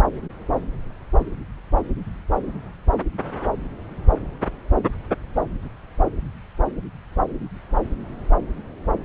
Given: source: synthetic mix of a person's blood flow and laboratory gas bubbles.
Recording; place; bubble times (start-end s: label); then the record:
Doppler ultrasound of blood flow; subclavian vein
no bubbles
From the record:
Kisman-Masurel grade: 000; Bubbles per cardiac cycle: 0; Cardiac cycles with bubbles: 0%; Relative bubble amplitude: no bubbles discernible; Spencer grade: 0 (complete lack of bubble signals)